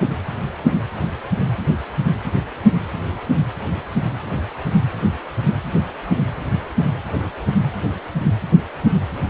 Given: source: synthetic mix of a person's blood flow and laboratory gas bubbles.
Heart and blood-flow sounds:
Doppler ultrasound of blood flow; precordium
no bubbles
From the record:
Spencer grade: 0 (complete lack of bubble signals)

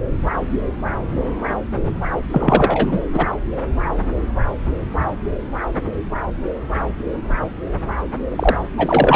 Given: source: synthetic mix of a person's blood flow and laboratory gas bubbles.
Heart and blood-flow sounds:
Doppler ultrasound of blood flow; subclavian vein
2.32-2.99 s: bubbles
3.14-3.27 s: bubbles
8.30-8.57 s: bubbles
8.77-9.16 s: bubbles
From the record:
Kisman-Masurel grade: 223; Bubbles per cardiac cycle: several, 3 to 8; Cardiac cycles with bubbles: 10 to 50%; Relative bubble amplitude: loud (0.450 to 0.775); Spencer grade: 2 (many but less than half of the cardiac periods contain bubble signals, singularly or in groups); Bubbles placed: anywhere in the cardiac cycle

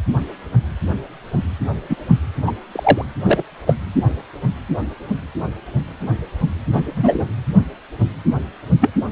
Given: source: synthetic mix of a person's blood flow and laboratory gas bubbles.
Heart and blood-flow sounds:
Doppler ultrasound of blood flow; precordium
1.89-1.96 s: bubbles
2.46-2.52 s: bubbles
2.71-3.06 s: bubbles
3.24-3.42 s: bubbles
3.66-3.73 s: bubbles
6.73-7.24 s: bubbles
8.80-8.90 s: bubbles
From the record:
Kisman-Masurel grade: 123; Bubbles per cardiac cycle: 1 to 2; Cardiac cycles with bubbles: 10 to 50%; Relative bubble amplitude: loud (0.450 to 0.775); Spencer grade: 2 (many but less than half of the cardiac periods contain bubble signals, singularly or in groups); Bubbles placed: anywhere in the cardiac cycle

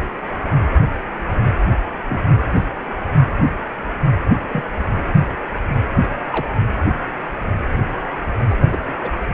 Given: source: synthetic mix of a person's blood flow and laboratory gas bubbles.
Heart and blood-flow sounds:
Doppler ultrasound of blood flow; precordium
2.09-2.32 s: bubbles
2.54-2.62 s: bubbles
4.53-4.64 s: bubbles
6.30-6.52 s: bubbles
8.48-8.77 s: bubbles
9.02-9.10 s: bubbles
From the record:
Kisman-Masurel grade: 122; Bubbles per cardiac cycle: 1 to 2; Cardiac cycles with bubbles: 10 to 50%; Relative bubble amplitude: moderate (0.250 to 0.450); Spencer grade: 2 (many but less than half of the cardiac periods contain bubble signals, singularly or in groups); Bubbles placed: anywhere in the cardiac cycle

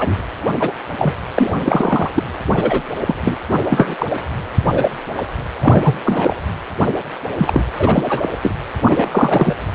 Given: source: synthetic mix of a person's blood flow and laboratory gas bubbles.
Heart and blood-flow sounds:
Doppler ultrasound of blood flow; precordium
0.00-0.17 s: bubbles
0.59-0.73 s: bubbles
0.97-1.14 s: bubbles
1.34-1.53 s: bubbles
1.66-2.11 s: bubbles
2.15-2.23 s: bubbles
2.53-2.81 s: bubbles
3.06-3.15 s: bubbles
3.23-3.38 s: bubbles
3.69-3.94 s: bubbles
3.99-4.06 s: bubbles
4.73-4.91 s: bubbles
5.17-5.22 s: bubbles
5.59-6.00 s: bubbles
6.03-6.37 s: bubbles
7.36-7.65 s: bubbles
7.79-8.03 s: bubbles
8.09-8.29 s: bubbles
8.43-8.54 s: bubbles
8.81-9.54 s: bubbles
From the record:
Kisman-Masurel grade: 243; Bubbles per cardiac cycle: several, 3 to 8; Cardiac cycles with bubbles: 100%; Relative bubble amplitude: loud (0.450 to 0.775); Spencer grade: 3 (all of the cardiac periods contain showers or single bubble signals, but not dominating or overriding the cardiac motion signals); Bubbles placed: anywhere in the cardiac cycle

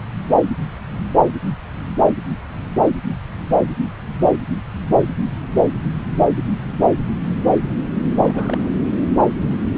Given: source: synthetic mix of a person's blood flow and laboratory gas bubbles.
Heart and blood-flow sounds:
Doppler ultrasound of blood flow; subclavian vein
8.22-8.70 s: bubbles
From the record:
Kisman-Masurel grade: 211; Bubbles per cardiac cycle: several, 3 to 8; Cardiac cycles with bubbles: 1 to 10%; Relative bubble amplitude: barely perceptible (0.100 to 0.250); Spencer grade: 1 (occasional bubble signal discernible with the cardiac motion signal, with majority of cardiac periods free of bubbles); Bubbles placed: anywhere in the cardiac cycle

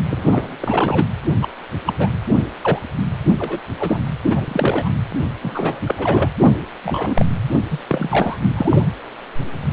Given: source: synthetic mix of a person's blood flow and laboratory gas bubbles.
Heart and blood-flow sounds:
Doppler ultrasound of blood flow; precordium
0.11-0.57 s: bubbles
0.60-1.08 s: bubbles
1.41-1.48 s: bubbles
1.85-1.94 s: bubbles
1.98-2.08 s: bubbles
2.61-2.78 s: bubbles
3.38-3.60 s: bubbles
3.79-4.00 s: bubbles
4.24-4.88 s: bubbles
5.42-5.81 s: bubbles
5.85-5.95 s: bubbles
5.97-6.29 s: bubbles
6.41-6.56 s: bubbles
6.83-7.25 s: bubbles
7.71-7.79 s: bubbles
7.88-8.38 s: bubbles
8.56-8.86 s: bubbles
From the record:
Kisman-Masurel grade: 242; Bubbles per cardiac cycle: several, 3 to 8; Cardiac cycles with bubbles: 100%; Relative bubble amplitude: moderate (0.250 to 0.450); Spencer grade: 3 (all of the cardiac periods contain showers or single bubble signals, but not dominating or overriding the cardiac motion signals); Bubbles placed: anywhere in the cardiac cycle

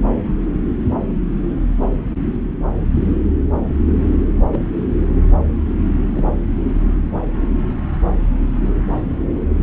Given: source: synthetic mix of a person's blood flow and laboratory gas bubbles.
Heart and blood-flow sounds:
Doppler ultrasound of blood flow; subclavian vein
4.52-4.58 s: bubbles
6.08-6.22 s: bubbles
From the record:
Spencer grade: 2 (many but less than half of the cardiac periods contain bubble signals, singularly or in groups); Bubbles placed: anywhere in the cardiac cycle

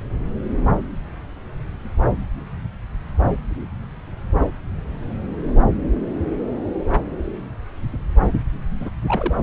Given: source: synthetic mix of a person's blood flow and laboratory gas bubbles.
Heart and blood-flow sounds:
Doppler ultrasound of blood flow; subclavian vein
8.79-8.90 s: bubbles
9.06-9.34 s: bubbles
From the record:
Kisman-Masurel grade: 122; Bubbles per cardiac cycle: 1 to 2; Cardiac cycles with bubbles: 10 to 50%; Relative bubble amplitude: moderate (0.250 to 0.450); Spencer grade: 2 (many but less than half of the cardiac periods contain bubble signals, singularly or in groups); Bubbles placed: anywhere in the cardiac cycle

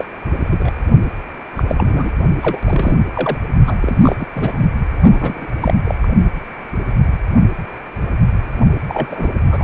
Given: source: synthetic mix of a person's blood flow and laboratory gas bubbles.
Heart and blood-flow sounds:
Doppler ultrasound of blood flow; precordium
0.00-0.04 s: bubbles
0.41-0.78 s: bubbles
1.57-1.63 s: bubbles
1.68-2.12 s: bubbles
2.41-2.60 s: bubbles
2.67-2.97 s: bubbles
3.16-3.38 s: bubbles
3.67-3.75 s: bubbles
3.81-4.16 s: bubbles
4.19-4.27 s: bubbles
4.35-4.71 s: bubbles
5.01-5.46 s: bubbles
5.61-5.74 s: bubbles
5.85-5.95 s: bubbles
6.03-6.07 s: bubbles
8.88-9.32 s: bubbles
9.50-9.64 s: bubbles
From the record:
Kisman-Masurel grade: 232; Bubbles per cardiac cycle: several, 3 to 8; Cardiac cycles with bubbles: 50 to 99%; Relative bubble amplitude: moderate (0.250 to 0.450); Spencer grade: 3 (all of the cardiac periods contain showers or single bubble signals, but not dominating or overriding the cardiac motion signals); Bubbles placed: only in the low amplitude regions of the cardiac cycle

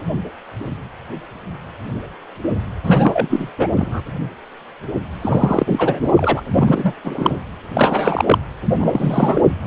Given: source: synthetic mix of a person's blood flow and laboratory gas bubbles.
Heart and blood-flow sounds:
Doppler ultrasound of blood flow; precordium
2.84-3.50 s: bubbles
3.58-3.69 s: bubbles
3.76-4.01 s: bubbles
5.21-6.13 s: bubbles
6.15-6.43 s: bubbles
6.54-6.94 s: bubbles
7.04-7.38 s: bubbles
7.73-8.38 s: bubbles
8.75-9.41 s: bubbles
9.62-9.67 s: bubbles
From the record:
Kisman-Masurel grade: 333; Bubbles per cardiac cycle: rolling drumbeat, 9 or more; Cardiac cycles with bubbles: 50 to 99%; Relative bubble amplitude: loud (0.450 to 0.775); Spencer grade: 3 (all of the cardiac periods contain showers or single bubble signals, but not dominating or overriding the cardiac motion signals); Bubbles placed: anywhere in the cardiac cycle

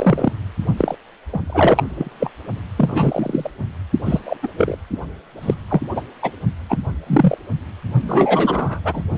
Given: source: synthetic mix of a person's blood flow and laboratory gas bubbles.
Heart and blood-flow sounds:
Doppler ultrasound of blood flow; precordium
0.00-0.33 s: bubbles
0.77-0.95 s: bubbles
1.32-1.40 s: bubbles
1.45-2.31 s: bubbles
2.77-3.50 s: bubbles
4.05-4.20 s: bubbles
4.25-4.37 s: bubbles
4.42-4.47 s: bubbles
4.57-4.77 s: bubbles
5.42-5.54 s: bubbles
5.70-5.81 s: bubbles
5.95-6.02 s: bubbles
6.22-6.31 s: bubbles
6.69-6.78 s: bubbles
7.06-7.38 s: bubbles
8.01-8.80 s: bubbles
8.85-9.02 s: bubbles
From the record:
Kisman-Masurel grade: 243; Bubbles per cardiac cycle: several, 3 to 8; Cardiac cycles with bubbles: 100%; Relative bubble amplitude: loud (0.450 to 0.775); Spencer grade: 3 (all of the cardiac periods contain showers or single bubble signals, but not dominating or overriding the cardiac motion signals); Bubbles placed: only in the low amplitude regions of the cardiac cycle

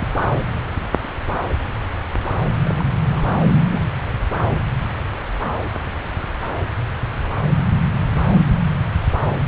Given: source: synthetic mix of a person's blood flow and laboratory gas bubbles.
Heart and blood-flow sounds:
Doppler ultrasound of blood flow; subclavian vein
0.00-0.08 s: bubbles
2.65-2.84 s: bubbles
3.10-3.34 s: bubbles
3.69-3.85 s: bubbles
From the record:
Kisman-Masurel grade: 121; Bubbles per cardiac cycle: 1 to 2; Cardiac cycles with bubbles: 10 to 50%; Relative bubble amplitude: barely perceptible (0.100 to 0.250); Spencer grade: 2 (many but less than half of the cardiac periods contain bubble signals, singularly or in groups); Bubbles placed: anywhere in the cardiac cycle

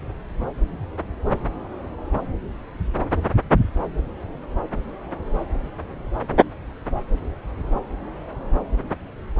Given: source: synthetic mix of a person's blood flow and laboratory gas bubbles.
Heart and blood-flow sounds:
Doppler ultrasound of blood flow; subclavian vein
no bubbles
From the record:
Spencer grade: 0 (complete lack of bubble signals)

